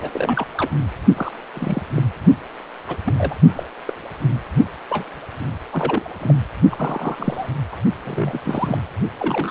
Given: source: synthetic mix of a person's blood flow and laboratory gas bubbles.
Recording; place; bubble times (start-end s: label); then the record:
Doppler ultrasound of blood flow; precordium
0.00-0.46 s: bubbles
0.57-0.70 s: bubbles
1.16-1.32 s: bubbles
1.54-1.82 s: bubbles
1.95-2.03 s: bubbles
2.88-2.97 s: bubbles
3.05-3.14 s: bubbles
3.18-3.35 s: bubbles
3.56-3.64 s: bubbles
3.89-3.91 s: bubbles
4.89-5.06 s: bubbles
5.72-6.13 s: bubbles
6.21-6.34 s: bubbles
6.71-7.46 s: bubbles
7.72-7.76 s: bubbles
8.04-8.40 s: bubbles
8.43-8.78 s: bubbles
9.19-9.51 s: bubbles
From the record:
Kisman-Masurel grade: 242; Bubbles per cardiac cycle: several, 3 to 8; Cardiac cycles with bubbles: 100%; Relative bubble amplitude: moderate (0.250 to 0.450); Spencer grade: 3 (all of the cardiac periods contain showers or single bubble signals, but not dominating or overriding the cardiac motion signals); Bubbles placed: only in the low amplitude regions of the cardiac cycle